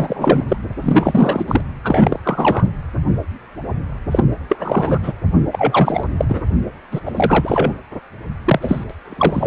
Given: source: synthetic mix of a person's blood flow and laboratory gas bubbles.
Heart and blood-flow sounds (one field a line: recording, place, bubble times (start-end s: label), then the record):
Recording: Doppler ultrasound of blood flow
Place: precordium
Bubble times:
0.00-0.44 s: bubbles
0.48-0.56 s: bubbles
0.81-1.45 s: bubbles
1.48-1.61 s: bubbles
1.84-2.20 s: bubbles
2.24-2.69 s: bubbles
4.11-4.24 s: bubbles
4.48-5.12 s: bubbles
5.52-6.03 s: bubbles
6.17-6.25 s: bubbles
6.28-6.42 s: bubbles
6.91-7.00 s: bubbles
7.05-7.73 s: bubbles
8.45-8.84 s: bubbles
8.89-8.95 s: bubbles
9.05-9.47 s: bubbles
From the record:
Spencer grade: 3 (all of the cardiac periods contain showers or single bubble signals, but not dominating or overriding the cardiac motion signals)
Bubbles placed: anywhere in the cardiac cycle